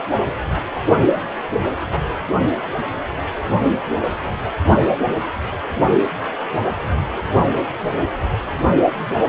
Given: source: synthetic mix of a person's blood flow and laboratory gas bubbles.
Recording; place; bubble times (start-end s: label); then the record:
Doppler ultrasound of blood flow; precordium
9.22-9.29 s: bubbles
From the record:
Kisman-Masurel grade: 111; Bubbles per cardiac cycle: 1 to 2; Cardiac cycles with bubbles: 1 to 10%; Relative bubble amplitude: barely perceptible (0.100 to 0.250); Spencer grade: 1 (occasional bubble signal discernible with the cardiac motion signal, with majority of cardiac periods free of bubbles); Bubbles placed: only in the low amplitude regions of the cardiac cycle